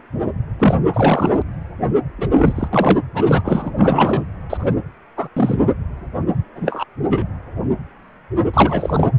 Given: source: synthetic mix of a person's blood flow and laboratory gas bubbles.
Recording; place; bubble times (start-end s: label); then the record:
Doppler ultrasound of blood flow; precordium
0.58-0.74 s: bubbles
0.93-1.42 s: bubbles
2.18-2.68 s: bubbles
2.73-3.01 s: bubbles
3.14-3.73 s: bubbles
3.78-4.25 s: bubbles
4.49-4.75 s: bubbles
5.17-5.28 s: bubbles
5.36-5.59 s: bubbles
6.55-6.84 s: bubbles
7.09-7.27 s: bubbles
8.54-9.11 s: bubbles
From the record:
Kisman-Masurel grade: 233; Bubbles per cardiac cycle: several, 3 to 8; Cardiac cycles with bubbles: 50 to 99%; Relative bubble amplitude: loud (0.450 to 0.775); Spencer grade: 3 (all of the cardiac periods contain showers or single bubble signals, but not dominating or overriding the cardiac motion signals); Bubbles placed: anywhere in the cardiac cycle